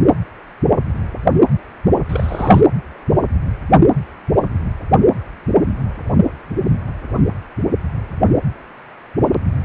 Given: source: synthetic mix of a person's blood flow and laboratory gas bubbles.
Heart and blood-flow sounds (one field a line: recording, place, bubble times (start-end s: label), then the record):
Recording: Doppler ultrasound of blood flow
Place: precordium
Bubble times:
2.09-2.61 s: bubbles
From the record:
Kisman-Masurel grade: 212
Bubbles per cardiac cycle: several, 3 to 8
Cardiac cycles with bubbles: 1 to 10%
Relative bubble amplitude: moderate (0.250 to 0.450)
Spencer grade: 1 (occasional bubble signal discernible with the cardiac motion signal, with majority of cardiac periods free of bubbles)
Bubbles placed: anywhere in the cardiac cycle